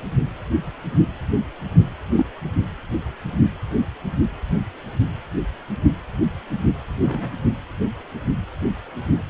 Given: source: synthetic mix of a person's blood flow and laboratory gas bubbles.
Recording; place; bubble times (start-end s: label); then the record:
Doppler ultrasound of blood flow; precordium
2.16-2.26 s: bubbles
7.02-7.31 s: bubbles
From the record:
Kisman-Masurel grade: 112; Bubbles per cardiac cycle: 1 to 2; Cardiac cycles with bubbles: 1 to 10%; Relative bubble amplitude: moderate (0.250 to 0.450); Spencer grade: 1 (occasional bubble signal discernible with the cardiac motion signal, with majority of cardiac periods free of bubbles); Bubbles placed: anywhere in the cardiac cycle